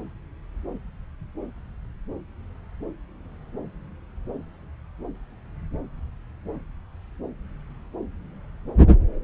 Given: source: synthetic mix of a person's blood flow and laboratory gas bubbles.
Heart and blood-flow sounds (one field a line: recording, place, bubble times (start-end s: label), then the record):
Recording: Doppler ultrasound of blood flow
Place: subclavian vein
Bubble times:
no bubbles
From the record:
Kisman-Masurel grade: 000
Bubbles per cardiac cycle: 0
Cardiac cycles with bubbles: 0%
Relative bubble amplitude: no bubbles discernible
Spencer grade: 0 (complete lack of bubble signals)